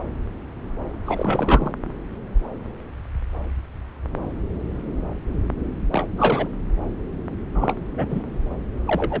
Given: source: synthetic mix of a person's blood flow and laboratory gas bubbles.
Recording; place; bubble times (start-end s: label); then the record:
Doppler ultrasound of blood flow; subclavian vein
1.04-1.72 s: bubbles
5.92-6.08 s: bubbles
6.17-6.48 s: bubbles
7.54-7.76 s: bubbles
7.97-8.06 s: bubbles
8.08-8.23 s: bubbles
8.85-9.20 s: bubbles
From the record:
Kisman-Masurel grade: 223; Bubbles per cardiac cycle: several, 3 to 8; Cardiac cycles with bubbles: 10 to 50%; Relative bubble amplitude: loud (0.450 to 0.775); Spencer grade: 2 (many but less than half of the cardiac periods contain bubble signals, singularly or in groups); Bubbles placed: anywhere in the cardiac cycle